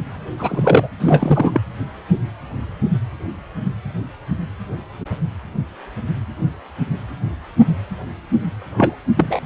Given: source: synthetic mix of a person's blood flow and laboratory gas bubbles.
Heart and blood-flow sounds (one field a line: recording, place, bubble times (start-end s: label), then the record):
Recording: Doppler ultrasound of blood flow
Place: precordium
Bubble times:
0.39-0.88 s: bubbles
0.99-1.60 s: bubbles
8.77-8.96 s: bubbles
9.17-9.40 s: bubbles
From the record:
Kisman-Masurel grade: 223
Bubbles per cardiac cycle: several, 3 to 8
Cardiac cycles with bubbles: 10 to 50%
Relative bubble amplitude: loud (0.450 to 0.775)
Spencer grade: 2 (many but less than half of the cardiac periods contain bubble signals, singularly or in groups)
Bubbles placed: anywhere in the cardiac cycle